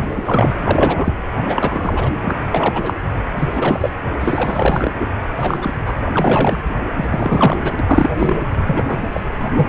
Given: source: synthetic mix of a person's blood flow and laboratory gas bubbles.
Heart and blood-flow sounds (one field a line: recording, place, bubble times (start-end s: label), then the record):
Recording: Doppler ultrasound of blood flow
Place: precordium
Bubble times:
0.00-0.54 s: bubbles
0.64-1.14 s: bubbles
1.36-2.11 s: bubbles
2.21-2.46 s: bubbles
2.50-2.94 s: bubbles
3.37-3.90 s: bubbles
4.14-4.17 s: bubbles
4.20-4.93 s: bubbles
5.37-5.71 s: bubbles
5.86-5.93 s: bubbles
5.96-5.98 s: bubbles
6.12-6.59 s: bubbles
6.94-7.75 s: bubbles
7.79-8.10 s: bubbles
8.19-8.38 s: bubbles
8.67-9.09 s: bubbles
9.12-9.21 s: bubbles
9.55-9.67 s: bubbles
From the record:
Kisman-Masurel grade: 333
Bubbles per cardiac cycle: rolling drumbeat, 9 or more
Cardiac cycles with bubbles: 50 to 99%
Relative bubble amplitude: loud (0.450 to 0.775)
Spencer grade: 3 (all of the cardiac periods contain showers or single bubble signals, but not dominating or overriding the cardiac motion signals)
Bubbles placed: anywhere in the cardiac cycle